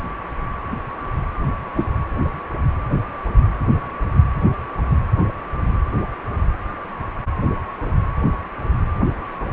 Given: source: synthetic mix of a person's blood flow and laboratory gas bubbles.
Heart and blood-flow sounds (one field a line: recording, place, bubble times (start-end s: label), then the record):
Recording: Doppler ultrasound of blood flow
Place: precordium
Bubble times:
1.76-1.87 s: bubbles
From the record:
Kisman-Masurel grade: 123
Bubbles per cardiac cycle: 1 to 2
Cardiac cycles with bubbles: 10 to 50%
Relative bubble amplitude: loud (0.450 to 0.775)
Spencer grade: 2 (many but less than half of the cardiac periods contain bubble signals, singularly or in groups)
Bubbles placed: anywhere in the cardiac cycle